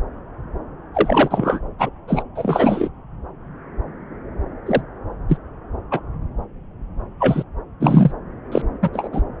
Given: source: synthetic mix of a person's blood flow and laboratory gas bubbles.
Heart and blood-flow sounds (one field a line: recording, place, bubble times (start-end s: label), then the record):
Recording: Doppler ultrasound of blood flow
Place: subclavian vein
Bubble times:
0.94-1.59 s: bubbles
1.79-1.90 s: bubbles
2.07-2.23 s: bubbles
2.35-2.89 s: bubbles
4.66-4.81 s: bubbles
5.29-5.37 s: bubbles
5.91-6.00 s: bubbles
7.19-7.43 s: bubbles
7.80-8.12 s: bubbles
8.52-8.62 s: bubbles
8.82-8.89 s: bubbles
8.93-9.08 s: bubbles
9.12-9.21 s: bubbles
From the record:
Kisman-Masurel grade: 233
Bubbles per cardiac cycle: several, 3 to 8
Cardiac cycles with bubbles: 50 to 99%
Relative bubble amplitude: loud (0.450 to 0.775)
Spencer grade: 3 (all of the cardiac periods contain showers or single bubble signals, but not dominating or overriding the cardiac motion signals)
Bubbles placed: anywhere in the cardiac cycle